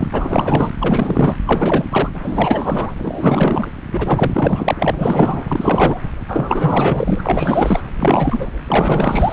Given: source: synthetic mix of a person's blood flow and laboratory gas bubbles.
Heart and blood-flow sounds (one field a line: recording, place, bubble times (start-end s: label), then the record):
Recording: Doppler ultrasound of blood flow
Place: subclavian vein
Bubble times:
0.00-0.08 s: bubbles
0.12-0.74 s: bubbles
0.79-1.37 s: bubbles
1.46-1.85 s: bubbles
1.90-2.09 s: bubbles
2.23-2.92 s: bubbles
2.98-3.68 s: bubbles
3.91-4.75 s: bubbles
4.79-6.00 s: bubbles
6.29-7.21 s: bubbles
7.24-7.81 s: bubbles
8.01-8.48 s: bubbles
8.68-9.33 s: bubbles
From the record:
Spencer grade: 4 (maximum detectable bubble signal sounding continuously throughout systole and diastole of every cardiac period, and overriding the amplitude of the normal cardiac signals)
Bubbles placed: anywhere in the cardiac cycle